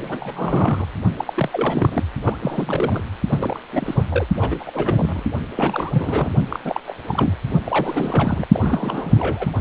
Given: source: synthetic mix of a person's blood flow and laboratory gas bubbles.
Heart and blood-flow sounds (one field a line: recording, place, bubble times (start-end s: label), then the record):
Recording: Doppler ultrasound of blood flow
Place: precordium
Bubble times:
0.01-0.86 s: bubbles
1.19-1.49 s: bubbles
1.52-2.03 s: bubbles
2.23-2.37 s: bubbles
2.43-3.00 s: bubbles
3.30-3.58 s: bubbles
3.72-4.04 s: bubbles
4.09-4.25 s: bubbles
4.35-5.23 s: bubbles
5.55-6.30 s: bubbles
6.49-6.59 s: bubbles
6.64-6.80 s: bubbles
6.85-6.94 s: bubbles
7.07-7.34 s: bubbles
7.65-8.46 s: bubbles
8.52-9.51 s: bubbles
From the record:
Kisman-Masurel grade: 342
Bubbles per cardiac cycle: rolling drumbeat, 9 or more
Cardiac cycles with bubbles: 100%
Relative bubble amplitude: moderate (0.250 to 0.450)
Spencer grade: 3 (all of the cardiac periods contain showers or single bubble signals, but not dominating or overriding the cardiac motion signals)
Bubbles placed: only in the low amplitude regions of the cardiac cycle